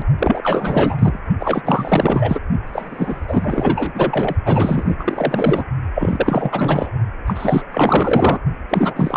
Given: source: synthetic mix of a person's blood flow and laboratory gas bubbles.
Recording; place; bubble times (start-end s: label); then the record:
Doppler ultrasound of blood flow; precordium
0.00-0.05 s: bubbles
0.19-0.96 s: bubbles
0.99-1.20 s: bubbles
1.39-2.40 s: bubbles
2.67-4.36 s: bubbles
4.45-4.96 s: bubbles
4.98-5.64 s: bubbles
5.94-6.89 s: bubbles
7.27-7.62 s: bubbles
7.71-8.38 s: bubbles
8.69-9.17 s: bubbles
From the record:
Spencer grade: 4 (maximum detectable bubble signal sounding continuously throughout systole and diastole of every cardiac period, and overriding the amplitude of the normal cardiac signals); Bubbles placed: only in the low amplitude regions of the cardiac cycle